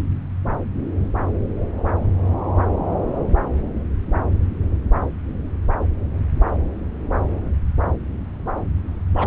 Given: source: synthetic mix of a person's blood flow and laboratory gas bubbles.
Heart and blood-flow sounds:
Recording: Doppler ultrasound of blood flow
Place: subclavian vein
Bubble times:
9.14-9.27 s: bubbles
From the record:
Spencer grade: 1 (occasional bubble signal discernible with the cardiac motion signal, with majority of cardiac periods free of bubbles)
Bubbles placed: anywhere in the cardiac cycle

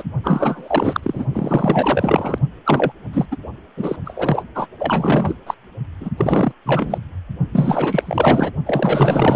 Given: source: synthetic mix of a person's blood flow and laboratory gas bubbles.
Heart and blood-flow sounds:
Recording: Doppler ultrasound of blood flow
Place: precordium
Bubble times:
0.00-0.03 s: bubbles
0.24-1.27 s: bubbles
1.33-2.39 s: bubbles
2.65-2.92 s: bubbles
3.13-3.25 s: bubbles
3.31-3.37 s: bubbles
3.77-3.96 s: bubbles
4.04-4.43 s: bubbles
4.55-4.67 s: bubbles
4.79-5.35 s: bubbles
5.46-5.54 s: bubbles
6.00-6.09 s: bubbles
6.17-6.52 s: bubbles
6.65-6.98 s: bubbles
7.52-8.51 s: bubbles
8.65-9.36 s: bubbles
From the record:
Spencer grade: 4 (maximum detectable bubble signal sounding continuously throughout systole and diastole of every cardiac period, and overriding the amplitude of the normal cardiac signals)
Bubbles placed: only in the low amplitude regions of the cardiac cycle

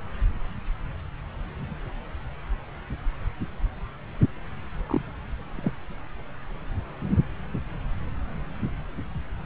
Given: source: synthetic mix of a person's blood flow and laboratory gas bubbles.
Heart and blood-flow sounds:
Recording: Doppler ultrasound of blood flow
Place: subclavian vein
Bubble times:
4.87-5.02 s: bubbles
5.55-5.72 s: bubbles
From the record:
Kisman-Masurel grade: 111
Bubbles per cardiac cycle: 1 to 2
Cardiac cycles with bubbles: 1 to 10%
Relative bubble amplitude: barely perceptible (0.100 to 0.250)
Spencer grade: 1 (occasional bubble signal discernible with the cardiac motion signal, with majority of cardiac periods free of bubbles)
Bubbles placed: anywhere in the cardiac cycle

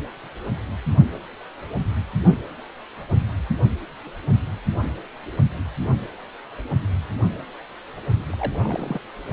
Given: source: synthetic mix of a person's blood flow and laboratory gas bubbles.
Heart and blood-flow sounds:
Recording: Doppler ultrasound of blood flow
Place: precordium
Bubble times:
8.29-8.99 s: bubbles
From the record:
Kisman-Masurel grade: 211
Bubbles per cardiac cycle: several, 3 to 8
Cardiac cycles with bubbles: 1 to 10%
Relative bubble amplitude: barely perceptible (0.100 to 0.250)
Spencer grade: 1 (occasional bubble signal discernible with the cardiac motion signal, with majority of cardiac periods free of bubbles)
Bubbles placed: only in the low amplitude regions of the cardiac cycle

